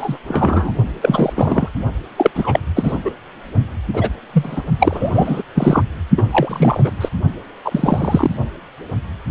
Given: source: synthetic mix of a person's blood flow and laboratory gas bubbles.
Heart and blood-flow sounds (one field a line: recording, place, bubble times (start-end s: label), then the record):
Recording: Doppler ultrasound of blood flow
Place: precordium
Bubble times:
0.00-0.18 s: bubbles
0.28-0.72 s: bubbles
1.02-1.33 s: bubbles
1.36-1.69 s: bubbles
2.16-2.31 s: bubbles
2.35-2.60 s: bubbles
2.76-2.98 s: bubbles
3.04-3.10 s: bubbles
3.93-4.09 s: bubbles
4.33-4.62 s: bubbles
4.79-5.42 s: bubbles
5.54-5.82 s: bubbles
6.17-6.23 s: bubbles
6.29-6.92 s: bubbles
7.00-7.09 s: bubbles
7.65-8.36 s: bubbles
From the record:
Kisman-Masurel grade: 233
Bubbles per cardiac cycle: several, 3 to 8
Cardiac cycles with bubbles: 50 to 99%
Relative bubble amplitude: loud (0.450 to 0.775)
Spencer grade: 3 (all of the cardiac periods contain showers or single bubble signals, but not dominating or overriding the cardiac motion signals)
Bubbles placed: only in the low amplitude regions of the cardiac cycle